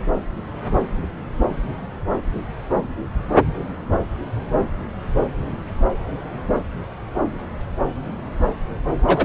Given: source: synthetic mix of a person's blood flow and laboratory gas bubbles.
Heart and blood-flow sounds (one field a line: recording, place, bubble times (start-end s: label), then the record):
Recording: Doppler ultrasound of blood flow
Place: subclavian vein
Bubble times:
9.07-9.25 s: bubbles
From the record:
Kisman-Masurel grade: 113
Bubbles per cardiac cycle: 1 to 2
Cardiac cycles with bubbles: 1 to 10%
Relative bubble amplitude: loud (0.450 to 0.775)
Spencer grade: 1 (occasional bubble signal discernible with the cardiac motion signal, with majority of cardiac periods free of bubbles)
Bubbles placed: anywhere in the cardiac cycle